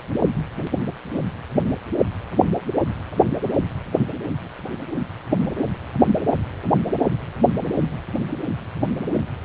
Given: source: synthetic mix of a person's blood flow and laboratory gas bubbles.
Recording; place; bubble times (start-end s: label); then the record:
Doppler ultrasound of blood flow; precordium
no bubbles
From the record:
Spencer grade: 0 (complete lack of bubble signals)